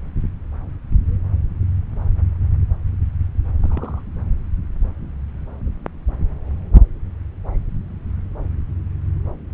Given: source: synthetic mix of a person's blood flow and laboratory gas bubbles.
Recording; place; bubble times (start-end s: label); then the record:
Doppler ultrasound of blood flow; subclavian vein
3.63-4.02 s: bubbles
From the record:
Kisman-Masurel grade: 111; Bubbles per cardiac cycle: 1 to 2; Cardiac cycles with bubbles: 1 to 10%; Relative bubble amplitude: barely perceptible (0.100 to 0.250); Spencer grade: 1 (occasional bubble signal discernible with the cardiac motion signal, with majority of cardiac periods free of bubbles); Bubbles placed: anywhere in the cardiac cycle